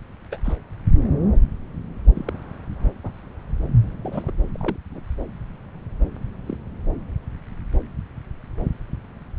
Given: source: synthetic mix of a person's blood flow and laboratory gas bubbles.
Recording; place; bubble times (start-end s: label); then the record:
Doppler ultrasound of blood flow; subclavian vein
0.31-0.39 s: bubbles
0.44-0.56 s: bubbles
2.15-2.33 s: bubbles
2.99-3.11 s: bubbles
4.03-4.32 s: bubbles
4.54-4.77 s: bubbles
4.91-5.02 s: bubbles
6.46-6.57 s: bubbles
From the record:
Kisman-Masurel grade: 121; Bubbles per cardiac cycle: 1 to 2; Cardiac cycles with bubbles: 10 to 50%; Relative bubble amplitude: barely perceptible (0.100 to 0.250); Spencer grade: 2 (many but less than half of the cardiac periods contain bubble signals, singularly or in groups); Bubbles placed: anywhere in the cardiac cycle